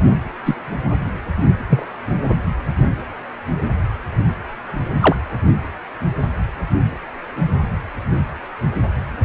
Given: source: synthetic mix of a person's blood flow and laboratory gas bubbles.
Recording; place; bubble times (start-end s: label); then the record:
Doppler ultrasound of blood flow; precordium
0.45-0.55 s: bubbles
1.70-1.86 s: bubbles
5.00-5.17 s: bubbles
From the record:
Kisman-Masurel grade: 123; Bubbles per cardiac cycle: 1 to 2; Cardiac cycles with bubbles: 10 to 50%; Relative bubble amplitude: loud (0.450 to 0.775); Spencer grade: 2 (many but less than half of the cardiac periods contain bubble signals, singularly or in groups); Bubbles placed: anywhere in the cardiac cycle